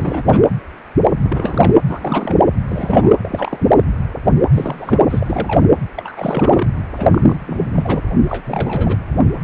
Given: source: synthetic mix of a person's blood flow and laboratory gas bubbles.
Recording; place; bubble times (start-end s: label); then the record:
Doppler ultrasound of blood flow; precordium
0.00-0.43 s: bubbles
1.23-1.73 s: bubbles
1.86-2.42 s: bubbles
2.67-3.15 s: bubbles
3.23-3.69 s: bubbles
4.51-5.00 s: bubbles
5.10-5.66 s: bubbles
5.96-6.67 s: bubbles
6.93-7.08 s: bubbles
7.10-7.70 s: bubbles
7.76-8.01 s: bubbles
8.30-9.04 s: bubbles
From the record:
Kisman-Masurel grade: 332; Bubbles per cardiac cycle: rolling drumbeat, 9 or more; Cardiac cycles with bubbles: 50 to 99%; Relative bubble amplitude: moderate (0.250 to 0.450); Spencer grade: 3 (all of the cardiac periods contain showers or single bubble signals, but not dominating or overriding the cardiac motion signals); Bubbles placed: anywhere in the cardiac cycle